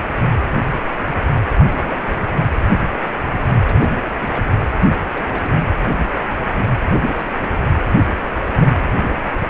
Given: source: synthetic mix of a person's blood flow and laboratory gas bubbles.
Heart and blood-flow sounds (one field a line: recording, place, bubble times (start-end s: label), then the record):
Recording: Doppler ultrasound of blood flow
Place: precordium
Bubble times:
0.71-0.80 s: bubbles
1.16-1.46 s: bubbles
1.54-2.33 s: bubbles
3.65-4.03 s: bubbles
4.10-4.46 s: bubbles
4.75-4.93 s: bubbles
5.12-5.53 s: bubbles
7.10-7.25 s: bubbles
7.34-7.46 s: bubbles
7.57-7.60 s: bubbles
7.81-7.84 s: bubbles
8.44-8.84 s: bubbles
From the record:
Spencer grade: 2 (many but less than half of the cardiac periods contain bubble signals, singularly or in groups)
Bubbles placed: anywhere in the cardiac cycle